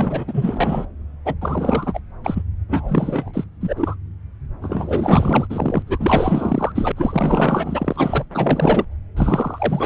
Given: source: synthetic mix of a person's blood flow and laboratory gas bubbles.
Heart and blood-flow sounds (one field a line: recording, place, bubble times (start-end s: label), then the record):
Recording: Doppler ultrasound of blood flow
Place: subclavian vein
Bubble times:
0.00-0.25 s: bubbles
0.27-0.86 s: bubbles
1.25-1.34 s: bubbles
1.41-2.00 s: bubbles
2.23-2.42 s: bubbles
2.69-3.46 s: bubbles
3.60-3.96 s: bubbles
4.62-5.47 s: bubbles
5.50-5.83 s: bubbles
5.87-6.92 s: bubbles
6.97-8.26 s: bubbles
8.32-8.85 s: bubbles
9.17-9.86 s: bubbles
From the record:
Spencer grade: 4 (maximum detectable bubble signal sounding continuously throughout systole and diastole of every cardiac period, and overriding the amplitude of the normal cardiac signals)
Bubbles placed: anywhere in the cardiac cycle